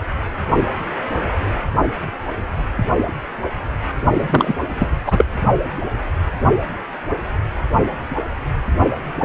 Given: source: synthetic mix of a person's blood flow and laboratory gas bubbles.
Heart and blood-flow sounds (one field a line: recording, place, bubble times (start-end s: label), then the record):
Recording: Doppler ultrasound of blood flow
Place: precordium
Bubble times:
4.12-4.55 s: bubbles
4.69-4.87 s: bubbles
5.06-5.25 s: bubbles
From the record:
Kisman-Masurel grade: 213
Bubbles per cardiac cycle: several, 3 to 8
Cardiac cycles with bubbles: 1 to 10%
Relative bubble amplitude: loud (0.450 to 0.775)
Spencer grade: 1 (occasional bubble signal discernible with the cardiac motion signal, with majority of cardiac periods free of bubbles)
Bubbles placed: only in the low amplitude regions of the cardiac cycle